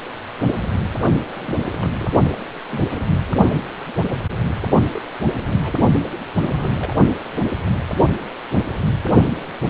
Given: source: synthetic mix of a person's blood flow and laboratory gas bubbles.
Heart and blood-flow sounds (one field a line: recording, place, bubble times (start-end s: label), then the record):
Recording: Doppler ultrasound of blood flow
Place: precordium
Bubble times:
1.31-1.35 s: bubbles
1.38-1.55 s: bubbles
1.59-1.64 s: bubbles
1.74-2.08 s: bubbles
2.31-2.44 s: bubbles
2.68-2.81 s: bubbles
2.83-3.00 s: bubbles
3.29-3.33 s: bubbles
4.93-5.02 s: bubbles
5.31-5.57 s: bubbles
5.64-5.77 s: bubbles
6.40-6.96 s: bubbles
From the record:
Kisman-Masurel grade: 221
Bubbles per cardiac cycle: several, 3 to 8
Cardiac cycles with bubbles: 10 to 50%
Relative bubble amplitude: barely perceptible (0.100 to 0.250)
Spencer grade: 2 (many but less than half of the cardiac periods contain bubble signals, singularly or in groups)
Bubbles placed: only in the low amplitude regions of the cardiac cycle